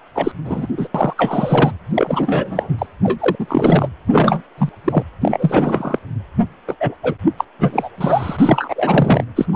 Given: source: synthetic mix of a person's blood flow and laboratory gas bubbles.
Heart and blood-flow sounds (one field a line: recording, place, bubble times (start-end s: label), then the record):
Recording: Doppler ultrasound of blood flow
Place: precordium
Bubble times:
0.15-0.32 s: bubbles
0.45-0.67 s: bubbles
0.77-0.88 s: bubbles
0.94-1.14 s: bubbles
1.17-1.73 s: bubbles
1.94-2.87 s: bubbles
3.03-3.36 s: bubbles
3.39-3.88 s: bubbles
4.08-4.42 s: bubbles
4.58-4.69 s: bubbles
4.84-5.02 s: bubbles
5.21-5.98 s: bubbles
6.67-6.75 s: bubbles
6.80-6.94 s: bubbles
7.03-7.15 s: bubbles
7.38-7.44 s: bubbles
7.59-7.89 s: bubbles
7.97-9.24 s: bubbles
9.36-9.46 s: bubbles
9.53-9.56 s: bubbles
From the record:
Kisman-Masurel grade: 343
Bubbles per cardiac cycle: rolling drumbeat, 9 or more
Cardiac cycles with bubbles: 100%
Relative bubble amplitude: loud (0.450 to 0.775)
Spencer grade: 3 (all of the cardiac periods contain showers or single bubble signals, but not dominating or overriding the cardiac motion signals)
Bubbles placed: anywhere in the cardiac cycle